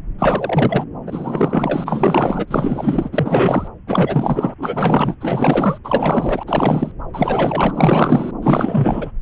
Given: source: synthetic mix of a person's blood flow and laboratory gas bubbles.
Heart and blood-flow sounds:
Doppler ultrasound of blood flow; subclavian vein
0.18-0.84 s: bubbles
1.06-3.09 s: bubbles
3.12-3.67 s: bubbles
3.86-4.54 s: bubbles
4.58-5.15 s: bubbles
5.21-5.79 s: bubbles
5.84-6.43 s: bubbles
6.46-6.92 s: bubbles
7.13-8.31 s: bubbles
8.42-9.12 s: bubbles
From the record:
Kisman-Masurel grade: 444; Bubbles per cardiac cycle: continuous sound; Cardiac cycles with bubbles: 100%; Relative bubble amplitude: maximal (0.775 to 0.999); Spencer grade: 4 (maximum detectable bubble signal sounding continuously throughout systole and diastole of every cardiac period, and overriding the amplitude of the normal cardiac signals); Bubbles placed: anywhere in the cardiac cycle

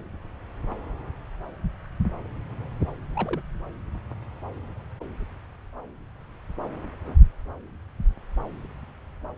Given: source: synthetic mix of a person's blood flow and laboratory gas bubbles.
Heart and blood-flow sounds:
Doppler ultrasound of blood flow; subclavian vein
3.15-3.41 s: bubbles
From the record:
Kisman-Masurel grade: 111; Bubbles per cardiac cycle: 1 to 2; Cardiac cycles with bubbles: 1 to 10%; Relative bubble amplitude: barely perceptible (0.100 to 0.250); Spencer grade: 1 (occasional bubble signal discernible with the cardiac motion signal, with majority of cardiac periods free of bubbles); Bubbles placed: anywhere in the cardiac cycle

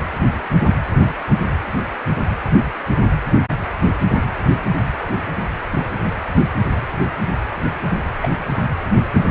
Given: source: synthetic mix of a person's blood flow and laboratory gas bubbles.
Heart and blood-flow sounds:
Doppler ultrasound of blood flow; precordium
8.21-8.29 s: bubbles
From the record:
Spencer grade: 2 (many but less than half of the cardiac periods contain bubble signals, singularly or in groups); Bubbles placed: anywhere in the cardiac cycle

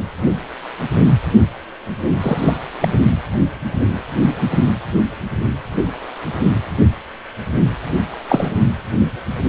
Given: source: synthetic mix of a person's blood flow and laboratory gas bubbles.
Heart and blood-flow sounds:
Doppler ultrasound of blood flow; precordium
2.20-2.57 s: bubbles
2.80-2.88 s: bubbles
8.29-8.50 s: bubbles
From the record:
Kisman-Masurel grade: 123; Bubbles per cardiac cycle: 1 to 2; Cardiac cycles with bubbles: 10 to 50%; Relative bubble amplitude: loud (0.450 to 0.775); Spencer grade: 2 (many but less than half of the cardiac periods contain bubble signals, singularly or in groups); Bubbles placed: only in the low amplitude regions of the cardiac cycle

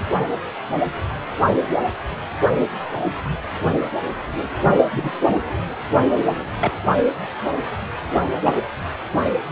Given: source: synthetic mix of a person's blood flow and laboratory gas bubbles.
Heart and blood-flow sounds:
Doppler ultrasound of blood flow; precordium
4.93-5.12 s: bubbles
6.60-6.71 s: bubbles
8.42-8.56 s: bubbles
From the record:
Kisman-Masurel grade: 122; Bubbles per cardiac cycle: 1 to 2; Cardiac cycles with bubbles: 10 to 50%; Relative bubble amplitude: moderate (0.250 to 0.450); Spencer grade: 2 (many but less than half of the cardiac periods contain bubble signals, singularly or in groups); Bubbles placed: only in the low amplitude regions of the cardiac cycle

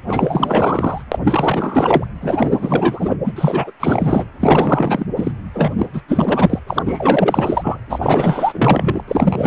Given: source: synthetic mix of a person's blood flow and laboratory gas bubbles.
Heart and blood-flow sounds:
Doppler ultrasound of blood flow; precordium
0.08-1.02 s: bubbles
1.11-1.19 s: bubbles
1.24-2.05 s: bubbles
2.21-3.17 s: bubbles
3.25-3.32 s: bubbles
3.35-3.71 s: bubbles
3.79-4.25 s: bubbles
4.40-5.06 s: bubbles
5.16-5.31 s: bubbles
5.54-5.76 s: bubbles
5.79-5.86 s: bubbles
5.93-6.02 s: bubbles
6.08-6.59 s: bubbles
6.67-6.83 s: bubbles
6.86-7.78 s: bubbles
7.89-7.99 s: bubbles
8.02-9.02 s: bubbles
9.07-9.47 s: bubbles
From the record:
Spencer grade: 4 (maximum detectable bubble signal sounding continuously throughout systole and diastole of every cardiac period, and overriding the amplitude of the normal cardiac signals); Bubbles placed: anywhere in the cardiac cycle

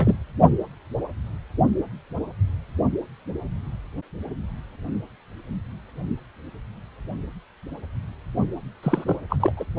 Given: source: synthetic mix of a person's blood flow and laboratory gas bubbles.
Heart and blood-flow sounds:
Doppler ultrasound of blood flow; precordium
0.00-0.18 s: bubbles
8.83-9.04 s: bubbles
9.07-9.16 s: bubbles
9.29-9.37 s: bubbles
9.40-9.52 s: bubbles
9.57-9.65 s: bubbles
From the record:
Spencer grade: 2 (many but less than half of the cardiac periods contain bubble signals, singularly or in groups); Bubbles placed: only in the low amplitude regions of the cardiac cycle

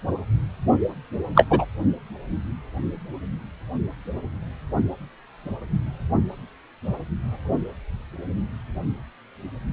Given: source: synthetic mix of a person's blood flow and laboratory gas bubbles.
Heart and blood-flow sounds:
Doppler ultrasound of blood flow; precordium
1.34-1.46 s: bubbles
1.50-1.66 s: bubbles
From the record:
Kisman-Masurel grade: 123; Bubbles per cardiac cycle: 1 to 2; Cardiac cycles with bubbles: 10 to 50%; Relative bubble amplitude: loud (0.450 to 0.775); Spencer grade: 2 (many but less than half of the cardiac periods contain bubble signals, singularly or in groups); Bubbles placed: only in the low amplitude regions of the cardiac cycle

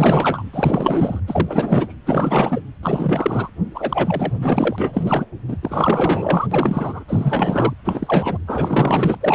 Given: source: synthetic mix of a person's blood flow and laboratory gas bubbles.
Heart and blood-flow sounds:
Doppler ultrasound of blood flow; precordium
0.00-0.43 s: bubbles
0.53-1.22 s: bubbles
1.26-1.95 s: bubbles
2.05-2.60 s: bubbles
2.83-3.50 s: bubbles
3.74-4.33 s: bubbles
4.36-5.27 s: bubbles
5.48-5.57 s: bubbles
5.62-6.47 s: bubbles
6.51-7.04 s: bubbles
7.08-7.74 s: bubbles
7.84-8.38 s: bubbles
8.47-9.18 s: bubbles
9.21-9.35 s: bubbles
From the record:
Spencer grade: 4 (maximum detectable bubble signal sounding continuously throughout systole and diastole of every cardiac period, and overriding the amplitude of the normal cardiac signals); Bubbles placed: anywhere in the cardiac cycle

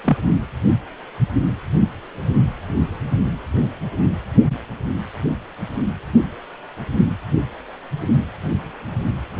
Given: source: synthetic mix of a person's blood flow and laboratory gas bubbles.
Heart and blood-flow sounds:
Doppler ultrasound of blood flow; precordium
0.04-0.17 s: bubbles
From the record:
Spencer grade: 1 (occasional bubble signal discernible with the cardiac motion signal, with majority of cardiac periods free of bubbles); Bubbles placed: only in the low amplitude regions of the cardiac cycle

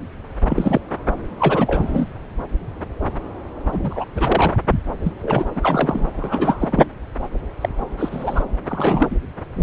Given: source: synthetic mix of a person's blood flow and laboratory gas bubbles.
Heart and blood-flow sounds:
Doppler ultrasound of blood flow; subclavian vein
0.49-0.80 s: bubbles
1.40-2.08 s: bubbles
3.70-4.05 s: bubbles
4.15-4.56 s: bubbles
5.02-5.12 s: bubbles
5.22-5.45 s: bubbles
5.55-6.07 s: bubbles
6.17-6.84 s: bubbles
7.61-7.69 s: bubbles
7.97-8.43 s: bubbles
8.69-9.16 s: bubbles
9.56-9.63 s: bubbles
From the record:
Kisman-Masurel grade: 232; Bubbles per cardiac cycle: several, 3 to 8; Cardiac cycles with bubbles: 50 to 99%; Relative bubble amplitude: moderate (0.250 to 0.450); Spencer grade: 3 (all of the cardiac periods contain showers or single bubble signals, but not dominating or overriding the cardiac motion signals); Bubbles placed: anywhere in the cardiac cycle

